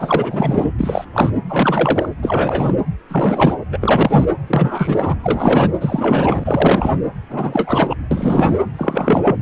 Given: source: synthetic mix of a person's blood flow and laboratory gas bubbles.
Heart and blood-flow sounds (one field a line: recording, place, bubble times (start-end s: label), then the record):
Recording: Doppler ultrasound of blood flow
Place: precordium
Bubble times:
0.00-0.73 s: bubbles
0.79-1.05 s: bubbles
1.14-1.31 s: bubbles
1.48-2.09 s: bubbles
2.22-2.73 s: bubbles
3.09-3.55 s: bubbles
3.72-4.26 s: bubbles
4.47-5.16 s: bubbles
5.23-5.70 s: bubbles
5.81-7.03 s: bubbles
7.29-7.95 s: bubbles
8.11-8.53 s: bubbles
8.76-9.36 s: bubbles
From the record:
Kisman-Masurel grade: 343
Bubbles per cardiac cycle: rolling drumbeat, 9 or more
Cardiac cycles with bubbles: 100%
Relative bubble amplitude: loud (0.450 to 0.775)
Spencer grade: 3 (all of the cardiac periods contain showers or single bubble signals, but not dominating or overriding the cardiac motion signals)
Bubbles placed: anywhere in the cardiac cycle